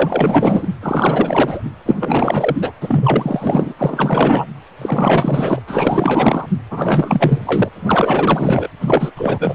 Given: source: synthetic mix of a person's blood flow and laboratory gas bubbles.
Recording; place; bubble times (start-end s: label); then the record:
Doppler ultrasound of blood flow; precordium
0.00-0.68 s: bubbles
0.82-1.63 s: bubbles
1.86-1.96 s: bubbles
2.00-2.73 s: bubbles
2.80-3.74 s: bubbles
3.78-4.47 s: bubbles
4.81-5.62 s: bubbles
5.67-6.46 s: bubbles
6.71-7.69 s: bubbles
7.75-8.69 s: bubbles
8.81-9.12 s: bubbles
9.16-9.55 s: bubbles
From the record:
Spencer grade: 4 (maximum detectable bubble signal sounding continuously throughout systole and diastole of every cardiac period, and overriding the amplitude of the normal cardiac signals); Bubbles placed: anywhere in the cardiac cycle